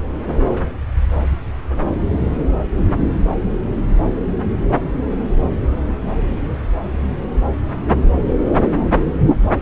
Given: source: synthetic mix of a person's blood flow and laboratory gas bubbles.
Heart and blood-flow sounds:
Doppler ultrasound of blood flow; subclavian vein
no bubbles
From the record:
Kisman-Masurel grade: 000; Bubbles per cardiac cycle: 0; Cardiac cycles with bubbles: 0%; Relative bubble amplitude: no bubbles discernible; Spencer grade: 0 (complete lack of bubble signals)

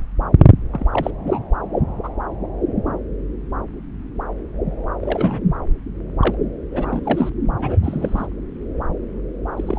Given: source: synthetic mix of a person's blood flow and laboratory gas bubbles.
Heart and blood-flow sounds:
Doppler ultrasound of blood flow; subclavian vein
0.72-0.86 s: bubbles
0.93-1.10 s: bubbles
1.26-1.39 s: bubbles
2.03-2.09 s: bubbles
5.01-5.40 s: bubbles
6.21-6.37 s: bubbles
6.71-7.29 s: bubbles
7.59-8.27 s: bubbles
9.56-9.79 s: bubbles
From the record:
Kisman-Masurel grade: 232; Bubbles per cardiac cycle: several, 3 to 8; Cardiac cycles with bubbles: 50 to 99%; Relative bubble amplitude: moderate (0.250 to 0.450); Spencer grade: 3 (all of the cardiac periods contain showers or single bubble signals, but not dominating or overriding the cardiac motion signals); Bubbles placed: anywhere in the cardiac cycle

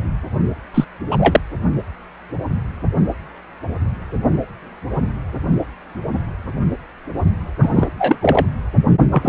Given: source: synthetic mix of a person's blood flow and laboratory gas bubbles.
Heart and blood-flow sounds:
Doppler ultrasound of blood flow; precordium
0.74-0.84 s: bubbles
1.11-1.17 s: bubbles
1.20-1.41 s: bubbles
7.62-7.87 s: bubbles
7.99-8.15 s: bubbles
8.21-8.46 s: bubbles
9.10-9.29 s: bubbles
From the record:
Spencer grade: 2 (many but less than half of the cardiac periods contain bubble signals, singularly or in groups); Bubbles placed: only in the low amplitude regions of the cardiac cycle

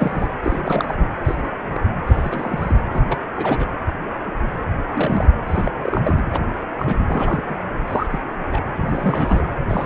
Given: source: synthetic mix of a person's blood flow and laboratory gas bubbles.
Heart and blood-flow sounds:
Doppler ultrasound of blood flow; precordium
0.00-0.28 s: bubbles
0.43-0.94 s: bubbles
0.98-1.08 s: bubbles
1.24-1.50 s: bubbles
1.72-1.80 s: bubbles
2.06-2.82 s: bubbles
2.88-3.18 s: bubbles
3.36-3.69 s: bubbles
4.90-5.39 s: bubbles
5.47-5.72 s: bubbles
5.82-6.25 s: bubbles
6.31-6.40 s: bubbles
6.79-6.96 s: bubbles
7.08-7.42 s: bubbles
7.49-7.56 s: bubbles
7.87-8.07 s: bubbles
8.10-8.22 s: bubbles
8.49-8.63 s: bubbles
8.77-9.48 s: bubbles
9.69-9.86 s: bubbles
From the record:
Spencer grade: 3 (all of the cardiac periods contain showers or single bubble signals, but not dominating or overriding the cardiac motion signals); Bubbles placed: anywhere in the cardiac cycle

